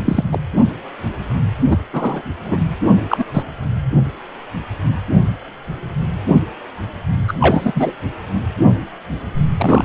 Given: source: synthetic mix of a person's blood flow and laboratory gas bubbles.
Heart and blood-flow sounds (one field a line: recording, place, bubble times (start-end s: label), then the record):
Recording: Doppler ultrasound of blood flow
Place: precordium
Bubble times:
0.00-0.24 s: bubbles
0.31-0.39 s: bubbles
1.70-1.77 s: bubbles
1.93-2.22 s: bubbles
2.44-2.57 s: bubbles
3.08-3.25 s: bubbles
3.33-3.44 s: bubbles
7.27-7.34 s: bubbles
7.40-7.73 s: bubbles
7.75-7.93 s: bubbles
9.58-9.85 s: bubbles
From the record:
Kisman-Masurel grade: 233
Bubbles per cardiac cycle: several, 3 to 8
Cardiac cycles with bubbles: 50 to 99%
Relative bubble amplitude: loud (0.450 to 0.775)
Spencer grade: 3 (all of the cardiac periods contain showers or single bubble signals, but not dominating or overriding the cardiac motion signals)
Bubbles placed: anywhere in the cardiac cycle